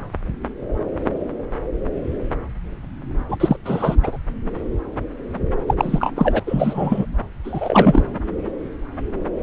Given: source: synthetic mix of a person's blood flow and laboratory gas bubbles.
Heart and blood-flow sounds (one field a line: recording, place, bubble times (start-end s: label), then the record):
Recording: Doppler ultrasound of blood flow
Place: subclavian vein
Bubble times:
3.29-3.56 s: bubbles
3.65-3.95 s: bubbles
4.03-4.19 s: bubbles
5.67-5.74 s: bubbles
5.77-6.40 s: bubbles
6.47-7.06 s: bubbles
7.44-8.02 s: bubbles
From the record:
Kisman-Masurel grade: 223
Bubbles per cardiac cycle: several, 3 to 8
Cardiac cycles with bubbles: 10 to 50%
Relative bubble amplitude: loud (0.450 to 0.775)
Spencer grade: 2 (many but less than half of the cardiac periods contain bubble signals, singularly or in groups)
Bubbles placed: anywhere in the cardiac cycle